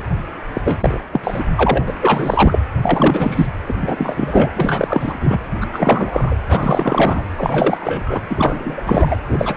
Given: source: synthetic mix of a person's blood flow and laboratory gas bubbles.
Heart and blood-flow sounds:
Doppler ultrasound of blood flow; precordium
0.53-0.61 s: bubbles
0.65-0.77 s: bubbles
0.80-1.00 s: bubbles
1.12-1.20 s: bubbles
1.23-1.43 s: bubbles
1.55-1.84 s: bubbles
1.87-1.93 s: bubbles
2.02-2.59 s: bubbles
2.81-3.47 s: bubbles
3.66-4.50 s: bubbles
4.55-5.38 s: bubbles
5.61-5.67 s: bubbles
5.72-6.36 s: bubbles
6.48-7.23 s: bubbles
7.38-8.21 s: bubbles
8.29-8.83 s: bubbles
8.86-9.16 s: bubbles
9.28-9.55 s: bubbles
From the record:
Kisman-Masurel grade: 343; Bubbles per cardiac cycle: rolling drumbeat, 9 or more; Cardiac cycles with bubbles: 100%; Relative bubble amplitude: loud (0.450 to 0.775); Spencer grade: 3 (all of the cardiac periods contain showers or single bubble signals, but not dominating or overriding the cardiac motion signals); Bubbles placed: anywhere in the cardiac cycle

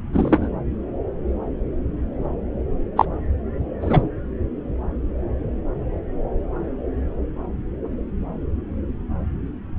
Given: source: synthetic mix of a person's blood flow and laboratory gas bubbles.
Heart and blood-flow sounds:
Doppler ultrasound of blood flow; subclavian vein
0.12-0.50 s: bubbles
2.96-3.05 s: bubbles
3.81-4.07 s: bubbles
From the record:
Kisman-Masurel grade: 123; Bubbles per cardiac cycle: 1 to 2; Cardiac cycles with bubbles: 10 to 50%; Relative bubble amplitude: loud (0.450 to 0.775); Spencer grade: 2 (many but less than half of the cardiac periods contain bubble signals, singularly or in groups); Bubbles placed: anywhere in the cardiac cycle

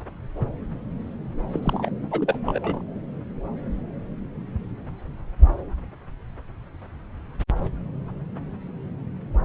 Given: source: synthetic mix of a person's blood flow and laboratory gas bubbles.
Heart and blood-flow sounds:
Doppler ultrasound of blood flow; subclavian vein
1.52-1.60 s: bubbles
1.62-1.89 s: bubbles
2.10-2.37 s: bubbles
2.46-2.82 s: bubbles
From the record:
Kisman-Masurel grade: 211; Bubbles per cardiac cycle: several, 3 to 8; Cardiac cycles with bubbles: 1 to 10%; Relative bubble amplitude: barely perceptible (0.100 to 0.250); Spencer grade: 1 (occasional bubble signal discernible with the cardiac motion signal, with majority of cardiac periods free of bubbles); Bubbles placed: anywhere in the cardiac cycle

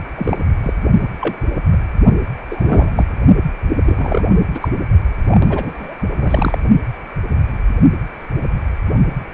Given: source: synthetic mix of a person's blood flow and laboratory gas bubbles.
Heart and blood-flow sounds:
Doppler ultrasound of blood flow; precordium
0.16-0.37 s: bubbles
0.62-0.73 s: bubbles
1.01-1.07 s: bubbles
1.21-1.36 s: bubbles
1.71-1.79 s: bubbles
2.50-3.05 s: bubbles
3.84-4.26 s: bubbles
4.29-4.38 s: bubbles
4.54-4.68 s: bubbles
5.24-5.97 s: bubbles
6.18-6.58 s: bubbles
From the record:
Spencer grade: 2 (many but less than half of the cardiac periods contain bubble signals, singularly or in groups); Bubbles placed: only in the low amplitude regions of the cardiac cycle

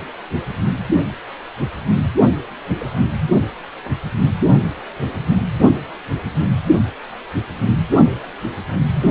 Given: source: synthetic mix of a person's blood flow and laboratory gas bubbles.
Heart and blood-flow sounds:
Doppler ultrasound of blood flow; precordium
2.73-3.04 s: bubbles
From the record:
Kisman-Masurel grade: 121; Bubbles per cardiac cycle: 1 to 2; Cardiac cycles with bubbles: 10 to 50%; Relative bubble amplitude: barely perceptible (0.100 to 0.250); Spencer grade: 2 (many but less than half of the cardiac periods contain bubble signals, singularly or in groups); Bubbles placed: anywhere in the cardiac cycle

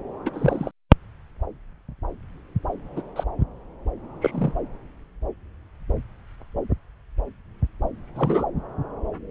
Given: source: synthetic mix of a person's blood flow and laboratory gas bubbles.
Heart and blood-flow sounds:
Doppler ultrasound of blood flow; subclavian vein
0.25-0.30 s: bubbles
0.33-0.71 s: bubbles
2.96-3.02 s: bubbles
3.16-3.24 s: bubbles
4.21-4.53 s: bubbles
8.15-8.45 s: bubbles
From the record:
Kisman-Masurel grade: 122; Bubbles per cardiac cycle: 1 to 2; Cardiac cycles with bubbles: 10 to 50%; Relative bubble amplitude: moderate (0.250 to 0.450); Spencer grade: 2 (many but less than half of the cardiac periods contain bubble signals, singularly or in groups); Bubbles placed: anywhere in the cardiac cycle

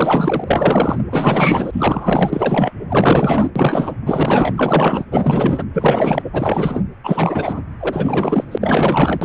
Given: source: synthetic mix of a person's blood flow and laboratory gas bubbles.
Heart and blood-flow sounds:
Doppler ultrasound of blood flow; precordium
0.00-0.44 s: bubbles
0.47-0.99 s: bubbles
1.10-2.72 s: bubbles
2.90-3.50 s: bubbles
3.56-3.97 s: bubbles
4.06-5.06 s: bubbles
5.11-5.64 s: bubbles
5.74-6.22 s: bubbles
6.33-6.82 s: bubbles
7.03-7.62 s: bubbles
7.80-8.57 s: bubbles
8.60-9.25 s: bubbles
From the record:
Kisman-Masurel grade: 444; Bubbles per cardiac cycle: continuous sound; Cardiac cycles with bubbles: 100%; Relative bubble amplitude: maximal (0.775 to 0.999); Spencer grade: 4 (maximum detectable bubble signal sounding continuously throughout systole and diastole of every cardiac period, and overriding the amplitude of the normal cardiac signals); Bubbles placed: anywhere in the cardiac cycle

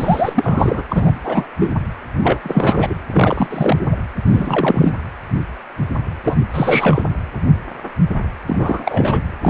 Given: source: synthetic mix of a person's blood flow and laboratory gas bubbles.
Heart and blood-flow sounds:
Doppler ultrasound of blood flow; precordium
0.00-0.83 s: bubbles
0.89-1.17 s: bubbles
1.23-1.46 s: bubbles
1.60-1.75 s: bubbles
2.21-2.39 s: bubbles
2.44-2.95 s: bubbles
3.12-3.47 s: bubbles
3.50-3.96 s: bubbles
4.25-4.93 s: bubbles
6.24-6.38 s: bubbles
6.53-7.02 s: bubbles
8.46-9.21 s: bubbles
9.42-9.50 s: bubbles
From the record:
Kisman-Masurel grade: 333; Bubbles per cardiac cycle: rolling drumbeat, 9 or more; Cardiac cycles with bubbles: 50 to 99%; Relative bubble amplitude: loud (0.450 to 0.775); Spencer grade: 3 (all of the cardiac periods contain showers or single bubble signals, but not dominating or overriding the cardiac motion signals); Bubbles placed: anywhere in the cardiac cycle

